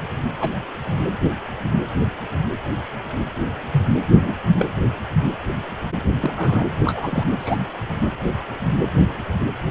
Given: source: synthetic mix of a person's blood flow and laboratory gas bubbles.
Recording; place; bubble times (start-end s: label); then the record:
Doppler ultrasound of blood flow; precordium
0.40-0.50 s: bubbles
3.72-3.83 s: bubbles
4.21-4.35 s: bubbles
4.59-4.65 s: bubbles
6.21-6.62 s: bubbles
6.84-7.23 s: bubbles
7.39-7.57 s: bubbles
From the record:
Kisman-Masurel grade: 122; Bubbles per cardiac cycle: 1 to 2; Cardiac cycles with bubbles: 10 to 50%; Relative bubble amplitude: moderate (0.250 to 0.450); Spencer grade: 2 (many but less than half of the cardiac periods contain bubble signals, singularly or in groups); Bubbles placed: anywhere in the cardiac cycle